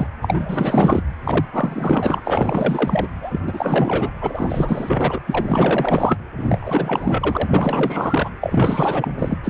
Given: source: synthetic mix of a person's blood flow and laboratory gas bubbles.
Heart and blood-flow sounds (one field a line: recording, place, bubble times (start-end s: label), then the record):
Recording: Doppler ultrasound of blood flow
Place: precordium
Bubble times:
0.00-0.08 s: bubbles
0.22-1.03 s: bubbles
1.24-1.46 s: bubbles
1.52-2.22 s: bubbles
2.25-3.08 s: bubbles
3.21-3.39 s: bubbles
3.47-4.10 s: bubbles
4.21-5.20 s: bubbles
5.26-6.19 s: bubbles
6.37-7.49 s: bubbles
7.53-8.30 s: bubbles
8.40-9.12 s: bubbles
9.19-9.36 s: bubbles
9.44-9.50 s: bubbles
From the record:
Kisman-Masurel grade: 444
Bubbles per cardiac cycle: continuous sound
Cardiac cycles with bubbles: 100%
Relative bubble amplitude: maximal (0.775 to 0.999)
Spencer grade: 4 (maximum detectable bubble signal sounding continuously throughout systole and diastole of every cardiac period, and overriding the amplitude of the normal cardiac signals)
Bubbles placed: anywhere in the cardiac cycle